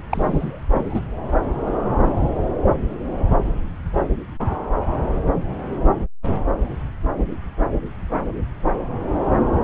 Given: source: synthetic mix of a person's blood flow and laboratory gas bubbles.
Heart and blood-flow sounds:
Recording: Doppler ultrasound of blood flow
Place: subclavian vein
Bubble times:
0.11-0.61 s: bubbles
0.73-1.01 s: bubbles
From the record:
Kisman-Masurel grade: 212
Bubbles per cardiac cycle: several, 3 to 8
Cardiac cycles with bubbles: 1 to 10%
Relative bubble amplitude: moderate (0.250 to 0.450)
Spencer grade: 1 (occasional bubble signal discernible with the cardiac motion signal, with majority of cardiac periods free of bubbles)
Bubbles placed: anywhere in the cardiac cycle

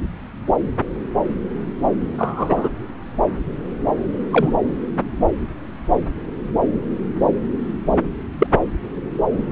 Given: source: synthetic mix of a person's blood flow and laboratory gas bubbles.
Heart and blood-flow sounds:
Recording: Doppler ultrasound of blood flow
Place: subclavian vein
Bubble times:
2.18-2.69 s: bubbles
4.29-4.53 s: bubbles
8.38-8.47 s: bubbles
From the record:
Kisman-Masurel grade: 123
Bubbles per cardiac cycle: 1 to 2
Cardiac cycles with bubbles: 10 to 50%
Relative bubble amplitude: loud (0.450 to 0.775)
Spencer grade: 2 (many but less than half of the cardiac periods contain bubble signals, singularly or in groups)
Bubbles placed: anywhere in the cardiac cycle

